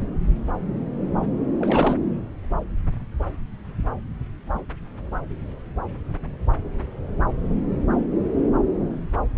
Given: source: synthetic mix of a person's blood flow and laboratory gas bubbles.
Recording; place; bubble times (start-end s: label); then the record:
Doppler ultrasound of blood flow; subclavian vein
1.58-1.96 s: bubbles
From the record:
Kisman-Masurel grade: 212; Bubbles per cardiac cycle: several, 3 to 8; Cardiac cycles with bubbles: 1 to 10%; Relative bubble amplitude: moderate (0.250 to 0.450); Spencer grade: 1 (occasional bubble signal discernible with the cardiac motion signal, with majority of cardiac periods free of bubbles); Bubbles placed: anywhere in the cardiac cycle